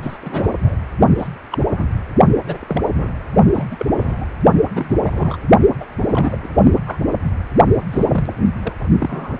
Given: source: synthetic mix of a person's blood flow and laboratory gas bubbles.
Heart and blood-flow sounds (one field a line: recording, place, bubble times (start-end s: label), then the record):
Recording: Doppler ultrasound of blood flow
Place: precordium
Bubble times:
0.03-0.17 s: bubbles
0.22-0.75 s: bubbles
1.17-1.27 s: bubbles
1.51-1.65 s: bubbles
1.69-1.83 s: bubbles
2.46-2.91 s: bubbles
2.94-3.21 s: bubbles
3.54-3.65 s: bubbles
3.71-3.76 s: bubbles
3.79-3.86 s: bubbles
3.96-4.25 s: bubbles
4.75-5.38 s: bubbles
5.79-5.85 s: bubbles
5.92-6.38 s: bubbles
6.42-6.49 s: bubbles
6.86-7.00 s: bubbles
7.92-8.06 s: bubbles
8.12-8.33 s: bubbles
8.62-8.73 s: bubbles
9.00-9.40 s: bubbles
From the record:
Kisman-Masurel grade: 242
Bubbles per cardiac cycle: several, 3 to 8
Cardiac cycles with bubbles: 100%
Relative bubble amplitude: moderate (0.250 to 0.450)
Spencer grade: 3 (all of the cardiac periods contain showers or single bubble signals, but not dominating or overriding the cardiac motion signals)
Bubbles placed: only in the low amplitude regions of the cardiac cycle